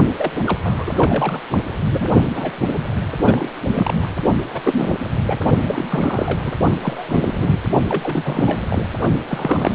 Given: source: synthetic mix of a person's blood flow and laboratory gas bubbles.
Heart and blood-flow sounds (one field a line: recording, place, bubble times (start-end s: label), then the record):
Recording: Doppler ultrasound of blood flow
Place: precordium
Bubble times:
0.17-0.33 s: bubbles
0.46-0.59 s: bubbles
0.63-1.42 s: bubbles
1.50-1.58 s: bubbles
1.93-2.07 s: bubbles
2.35-2.51 s: bubbles
2.58-2.69 s: bubbles
3.18-3.49 s: bubbles
3.73-4.08 s: bubbles
4.53-4.96 s: bubbles
5.27-5.40 s: bubbles
5.62-5.86 s: bubbles
5.89-6.53 s: bubbles
6.81-7.60 s: bubbles
7.88-8.65 s: bubbles
8.69-8.89 s: bubbles
9.29-9.75 s: bubbles
From the record:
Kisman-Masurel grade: 342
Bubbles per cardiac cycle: rolling drumbeat, 9 or more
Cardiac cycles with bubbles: 100%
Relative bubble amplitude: moderate (0.250 to 0.450)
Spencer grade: 3 (all of the cardiac periods contain showers or single bubble signals, but not dominating or overriding the cardiac motion signals)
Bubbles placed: only in the low amplitude regions of the cardiac cycle